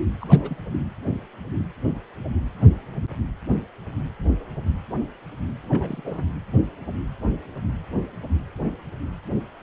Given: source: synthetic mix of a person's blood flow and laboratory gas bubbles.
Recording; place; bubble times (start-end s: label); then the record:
Doppler ultrasound of blood flow; precordium
0.20-0.26 s: bubbles
0.29-0.56 s: bubbles
5.61-6.24 s: bubbles
From the record:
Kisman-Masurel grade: 211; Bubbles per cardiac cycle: several, 3 to 8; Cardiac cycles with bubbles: 1 to 10%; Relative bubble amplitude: barely perceptible (0.100 to 0.250); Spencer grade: 1 (occasional bubble signal discernible with the cardiac motion signal, with majority of cardiac periods free of bubbles); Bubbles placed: anywhere in the cardiac cycle